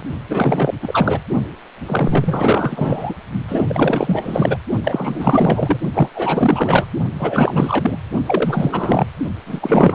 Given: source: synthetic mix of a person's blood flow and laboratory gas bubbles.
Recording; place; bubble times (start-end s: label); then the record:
Doppler ultrasound of blood flow; precordium
0.00-0.03 s: bubbles
0.29-0.74 s: bubbles
0.81-1.22 s: bubbles
1.86-3.15 s: bubbles
3.48-4.57 s: bubbles
4.83-5.77 s: bubbles
5.93-6.10 s: bubbles
6.15-6.86 s: bubbles
7.19-7.96 s: bubbles
8.26-9.06 s: bubbles
9.46-9.95 s: bubbles
From the record:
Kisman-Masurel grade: 444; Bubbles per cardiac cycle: continuous sound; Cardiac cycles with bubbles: 100%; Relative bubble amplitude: maximal (0.775 to 0.999); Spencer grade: 4 (maximum detectable bubble signal sounding continuously throughout systole and diastole of every cardiac period, and overriding the amplitude of the normal cardiac signals); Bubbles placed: only in the low amplitude regions of the cardiac cycle